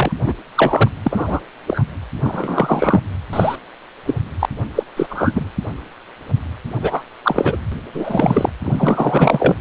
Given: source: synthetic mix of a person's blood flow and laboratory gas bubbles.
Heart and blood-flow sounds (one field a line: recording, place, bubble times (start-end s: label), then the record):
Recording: Doppler ultrasound of blood flow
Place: precordium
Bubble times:
0.00-0.12 s: bubbles
0.19-0.33 s: bubbles
0.56-0.91 s: bubbles
1.03-1.40 s: bubbles
1.68-1.83 s: bubbles
2.21-3.01 s: bubbles
3.32-3.56 s: bubbles
4.06-4.15 s: bubbles
4.39-4.46 s: bubbles
4.75-4.83 s: bubbles
4.96-5.07 s: bubbles
5.10-5.50 s: bubbles
6.82-7.04 s: bubbles
7.24-7.57 s: bubbles
7.93-8.51 s: bubbles
8.64-9.56 s: bubbles
From the record:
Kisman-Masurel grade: 233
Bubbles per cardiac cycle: several, 3 to 8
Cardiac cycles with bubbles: 50 to 99%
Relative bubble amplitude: loud (0.450 to 0.775)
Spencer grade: 3 (all of the cardiac periods contain showers or single bubble signals, but not dominating or overriding the cardiac motion signals)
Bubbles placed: anywhere in the cardiac cycle